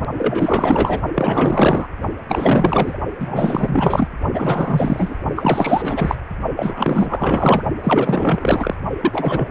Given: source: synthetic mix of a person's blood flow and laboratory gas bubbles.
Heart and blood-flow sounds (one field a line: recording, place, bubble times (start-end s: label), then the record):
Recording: Doppler ultrasound of blood flow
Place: precordium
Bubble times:
0.17-1.02 s: bubbles
1.15-1.88 s: bubbles
2.28-2.97 s: bubbles
3.20-4.08 s: bubbles
4.33-5.16 s: bubbles
5.36-6.15 s: bubbles
6.56-7.63 s: bubbles
7.83-8.76 s: bubbles
9.02-9.51 s: bubbles
From the record:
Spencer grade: 4 (maximum detectable bubble signal sounding continuously throughout systole and diastole of every cardiac period, and overriding the amplitude of the normal cardiac signals)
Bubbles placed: only in the low amplitude regions of the cardiac cycle